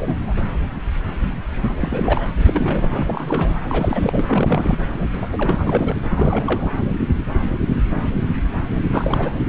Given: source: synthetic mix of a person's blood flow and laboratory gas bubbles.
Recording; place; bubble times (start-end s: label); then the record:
Doppler ultrasound of blood flow; subclavian vein
0.00-0.16 s: bubbles
0.28-0.34 s: bubbles
0.37-0.48 s: bubbles
1.61-2.28 s: bubbles
2.44-3.04 s: bubbles
3.06-3.60 s: bubbles
3.69-4.25 s: bubbles
4.29-4.76 s: bubbles
5.00-5.06 s: bubbles
5.12-5.26 s: bubbles
5.33-5.95 s: bubbles
6.16-6.69 s: bubbles
8.91-9.33 s: bubbles
From the record:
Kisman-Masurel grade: 332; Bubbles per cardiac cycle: rolling drumbeat, 9 or more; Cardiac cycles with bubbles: 50 to 99%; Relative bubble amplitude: moderate (0.250 to 0.450); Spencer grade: 3 (all of the cardiac periods contain showers or single bubble signals, but not dominating or overriding the cardiac motion signals); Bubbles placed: anywhere in the cardiac cycle